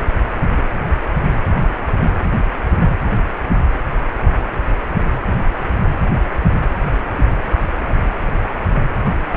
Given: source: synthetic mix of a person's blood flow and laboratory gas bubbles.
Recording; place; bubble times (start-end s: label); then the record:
Doppler ultrasound of blood flow; precordium
no bubbles
From the record:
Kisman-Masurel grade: 000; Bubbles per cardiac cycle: 0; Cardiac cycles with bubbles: 0%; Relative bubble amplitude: no bubbles discernible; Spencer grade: 0 (complete lack of bubble signals)